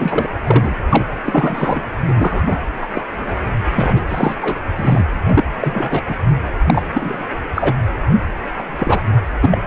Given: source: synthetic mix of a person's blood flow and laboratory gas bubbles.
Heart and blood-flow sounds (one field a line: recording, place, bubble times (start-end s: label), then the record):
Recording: Doppler ultrasound of blood flow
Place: precordium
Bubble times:
0.00-0.27 s: bubbles
0.44-0.75 s: bubbles
0.89-1.04 s: bubbles
1.25-1.84 s: bubbles
2.08-2.43 s: bubbles
2.46-2.61 s: bubbles
2.82-2.88 s: bubbles
2.95-3.02 s: bubbles
3.18-3.35 s: bubbles
3.75-4.05 s: bubbles
4.09-4.35 s: bubbles
4.42-4.58 s: bubbles
4.75-5.05 s: bubbles
5.26-5.43 s: bubbles
5.63-6.02 s: bubbles
6.08-6.15 s: bubbles
6.66-6.82 s: bubbles
6.93-7.24 s: bubbles
7.54-7.73 s: bubbles
8.58-8.62 s: bubbles
8.78-9.01 s: bubbles
9.39-9.58 s: bubbles
From the record:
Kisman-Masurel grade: 243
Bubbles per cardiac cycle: several, 3 to 8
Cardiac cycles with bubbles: 100%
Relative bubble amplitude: loud (0.450 to 0.775)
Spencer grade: 3 (all of the cardiac periods contain showers or single bubble signals, but not dominating or overriding the cardiac motion signals)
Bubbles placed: anywhere in the cardiac cycle